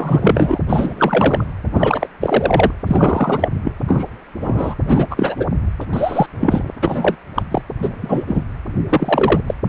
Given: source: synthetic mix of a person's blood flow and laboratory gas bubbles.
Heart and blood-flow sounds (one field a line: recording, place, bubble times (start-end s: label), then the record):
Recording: Doppler ultrasound of blood flow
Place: precordium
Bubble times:
0.00-0.58 s: bubbles
0.69-1.45 s: bubbles
1.73-2.08 s: bubbles
2.21-2.71 s: bubbles
2.87-3.49 s: bubbles
3.63-3.72 s: bubbles
3.88-4.04 s: bubbles
4.42-4.75 s: bubbles
4.85-5.07 s: bubbles
5.11-5.46 s: bubbles
5.81-5.86 s: bubbles
5.93-6.26 s: bubbles
6.40-6.71 s: bubbles
6.82-7.16 s: bubbles
7.35-7.42 s: bubbles
7.51-7.62 s: bubbles
7.77-8.25 s: bubbles
8.28-8.43 s: bubbles
8.89-9.40 s: bubbles
9.46-9.54 s: bubbles
9.67-9.69 s: bubbles
From the record:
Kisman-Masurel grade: 243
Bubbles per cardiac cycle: several, 3 to 8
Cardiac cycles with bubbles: 100%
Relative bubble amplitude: loud (0.450 to 0.775)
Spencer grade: 3 (all of the cardiac periods contain showers or single bubble signals, but not dominating or overriding the cardiac motion signals)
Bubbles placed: anywhere in the cardiac cycle